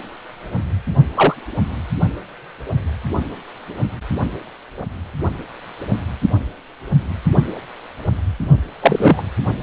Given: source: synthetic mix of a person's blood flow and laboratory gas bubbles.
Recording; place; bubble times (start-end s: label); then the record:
Doppler ultrasound of blood flow; precordium
1.15-1.34 s: bubbles
8.81-9.23 s: bubbles
From the record:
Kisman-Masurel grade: 123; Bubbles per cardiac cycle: 1 to 2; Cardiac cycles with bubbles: 10 to 50%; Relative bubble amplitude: loud (0.450 to 0.775); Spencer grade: 2 (many but less than half of the cardiac periods contain bubble signals, singularly or in groups); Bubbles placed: anywhere in the cardiac cycle